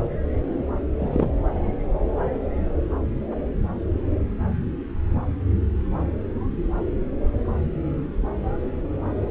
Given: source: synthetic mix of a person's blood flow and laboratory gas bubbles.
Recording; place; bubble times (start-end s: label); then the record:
Doppler ultrasound of blood flow; subclavian vein
0.99-1.28 s: bubbles
From the record:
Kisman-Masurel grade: 112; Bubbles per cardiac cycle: 1 to 2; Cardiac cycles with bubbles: 1 to 10%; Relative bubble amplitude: moderate (0.250 to 0.450); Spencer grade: 1 (occasional bubble signal discernible with the cardiac motion signal, with majority of cardiac periods free of bubbles); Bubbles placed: anywhere in the cardiac cycle